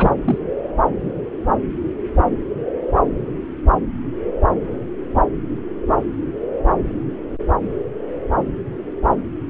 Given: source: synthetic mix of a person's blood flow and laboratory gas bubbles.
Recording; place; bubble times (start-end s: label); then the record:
Doppler ultrasound of blood flow; subclavian vein
0.00-0.10 s: bubbles
0.24-0.38 s: bubbles
From the record:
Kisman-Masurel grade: 212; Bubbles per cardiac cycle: several, 3 to 8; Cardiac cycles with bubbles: 1 to 10%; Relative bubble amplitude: moderate (0.250 to 0.450); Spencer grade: 1 (occasional bubble signal discernible with the cardiac motion signal, with majority of cardiac periods free of bubbles); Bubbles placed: anywhere in the cardiac cycle